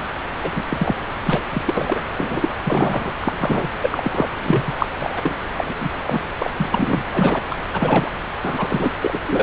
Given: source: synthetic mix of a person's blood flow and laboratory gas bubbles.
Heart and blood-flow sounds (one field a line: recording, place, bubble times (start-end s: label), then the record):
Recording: Doppler ultrasound of blood flow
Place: subclavian vein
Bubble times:
0.41-0.51 s: bubbles
0.55-0.64 s: bubbles
0.69-0.96 s: bubbles
1.23-1.43 s: bubbles
1.51-1.61 s: bubbles
1.66-2.04 s: bubbles
2.17-2.49 s: bubbles
2.62-3.13 s: bubbles
3.20-3.68 s: bubbles
3.81-4.27 s: bubbles
4.43-4.62 s: bubbles
4.67-4.75 s: bubbles
4.79-4.86 s: bubbles
4.97-5.35 s: bubbles
5.52-5.73 s: bubbles
5.79-5.89 s: bubbles
6.06-6.21 s: bubbles
6.38-6.50 s: bubbles
6.57-7.03 s: bubbles
7.12-7.42 s: bubbles
7.50-7.58 s: bubbles
7.72-8.12 s: bubbles
8.42-8.93 s: bubbles
9.01-9.20 s: bubbles
9.25-9.43 s: bubbles
From the record:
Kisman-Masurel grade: 243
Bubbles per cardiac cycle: several, 3 to 8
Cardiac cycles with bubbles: 100%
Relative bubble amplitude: loud (0.450 to 0.775)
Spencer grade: 3 (all of the cardiac periods contain showers or single bubble signals, but not dominating or overriding the cardiac motion signals)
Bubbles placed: anywhere in the cardiac cycle